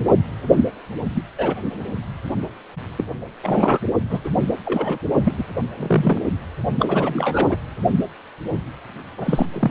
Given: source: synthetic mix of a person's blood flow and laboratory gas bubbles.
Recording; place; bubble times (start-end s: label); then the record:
Doppler ultrasound of blood flow; precordium
0.57-0.65 s: bubbles
1.14-1.22 s: bubbles
1.38-1.55 s: bubbles
2.98-3.04 s: bubbles
3.42-3.80 s: bubbles
4.09-4.20 s: bubbles
4.24-4.30 s: bubbles
4.65-4.98 s: bubbles
5.24-5.33 s: bubbles
5.37-5.44 s: bubbles
5.77-6.23 s: bubbles
6.79-7.57 s: bubbles
9.18-9.46 s: bubbles
9.53-9.71 s: bubbles
From the record:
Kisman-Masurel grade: 233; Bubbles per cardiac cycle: several, 3 to 8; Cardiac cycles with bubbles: 50 to 99%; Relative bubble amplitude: loud (0.450 to 0.775); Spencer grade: 3 (all of the cardiac periods contain showers or single bubble signals, but not dominating or overriding the cardiac motion signals); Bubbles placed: only in the low amplitude regions of the cardiac cycle